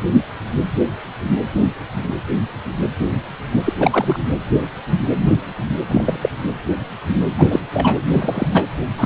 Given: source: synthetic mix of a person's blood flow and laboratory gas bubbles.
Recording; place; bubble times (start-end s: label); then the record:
Doppler ultrasound of blood flow; precordium
3.65-3.74 s: bubbles
3.79-4.24 s: bubbles
5.91-6.17 s: bubbles
6.22-6.29 s: bubbles
7.38-7.60 s: bubbles
7.74-8.00 s: bubbles
8.07-8.66 s: bubbles
8.97-9.06 s: bubbles
From the record:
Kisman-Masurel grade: 223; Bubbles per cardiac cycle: several, 3 to 8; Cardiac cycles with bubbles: 10 to 50%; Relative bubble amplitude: loud (0.450 to 0.775); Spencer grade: 2 (many but less than half of the cardiac periods contain bubble signals, singularly or in groups); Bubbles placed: anywhere in the cardiac cycle